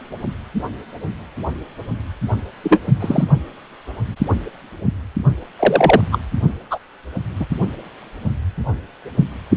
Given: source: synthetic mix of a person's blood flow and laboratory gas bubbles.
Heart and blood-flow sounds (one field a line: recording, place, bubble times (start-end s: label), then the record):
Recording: Doppler ultrasound of blood flow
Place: precordium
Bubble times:
2.63-2.79 s: bubbles
3.00-3.24 s: bubbles
5.59-6.01 s: bubbles
6.12-6.18 s: bubbles
6.71-6.79 s: bubbles
7.39-7.46 s: bubbles
From the record:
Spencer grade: 2 (many but less than half of the cardiac periods contain bubble signals, singularly or in groups)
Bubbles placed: only in the low amplitude regions of the cardiac cycle